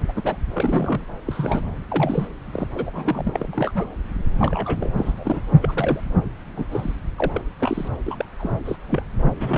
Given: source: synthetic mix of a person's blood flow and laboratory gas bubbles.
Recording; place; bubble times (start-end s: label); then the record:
Doppler ultrasound of blood flow; subclavian vein
0.01-0.05 s: bubbles
0.08-0.12 s: bubbles
0.15-0.36 s: bubbles
0.52-1.05 s: bubbles
1.27-1.61 s: bubbles
1.90-2.27 s: bubbles
2.53-2.67 s: bubbles
2.73-2.91 s: bubbles
2.93-3.47 s: bubbles
3.53-3.89 s: bubbles
4.38-4.92 s: bubbles
4.97-5.12 s: bubbles
5.17-5.42 s: bubbles
5.62-6.04 s: bubbles
6.55-6.66 s: bubbles
6.71-6.93 s: bubbles
7.17-7.41 s: bubbles
7.59-7.88 s: bubbles
8.06-8.25 s: bubbles
8.38-8.54 s: bubbles
8.65-8.77 s: bubbles
8.88-9.03 s: bubbles
9.36-9.58 s: bubbles
From the record:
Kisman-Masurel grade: 242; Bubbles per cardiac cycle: several, 3 to 8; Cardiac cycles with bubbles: 100%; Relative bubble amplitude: moderate (0.250 to 0.450); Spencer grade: 3 (all of the cardiac periods contain showers or single bubble signals, but not dominating or overriding the cardiac motion signals); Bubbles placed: anywhere in the cardiac cycle